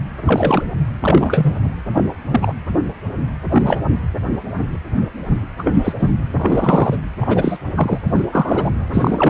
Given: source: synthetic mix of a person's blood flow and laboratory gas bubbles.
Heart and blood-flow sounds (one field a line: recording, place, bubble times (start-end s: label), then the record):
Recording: Doppler ultrasound of blood flow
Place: precordium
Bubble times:
0.23-0.63 s: bubbles
1.01-1.60 s: bubbles
1.94-2.14 s: bubbles
2.31-2.54 s: bubbles
3.52-3.81 s: bubbles
5.58-5.95 s: bubbles
5.99-6.10 s: bubbles
6.38-6.97 s: bubbles
7.20-7.58 s: bubbles
7.75-7.99 s: bubbles
8.14-8.24 s: bubbles
8.32-8.71 s: bubbles
8.93-9.30 s: bubbles
From the record:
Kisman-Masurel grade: 233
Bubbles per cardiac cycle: several, 3 to 8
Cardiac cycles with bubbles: 50 to 99%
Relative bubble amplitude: loud (0.450 to 0.775)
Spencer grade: 3 (all of the cardiac periods contain showers or single bubble signals, but not dominating or overriding the cardiac motion signals)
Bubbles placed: anywhere in the cardiac cycle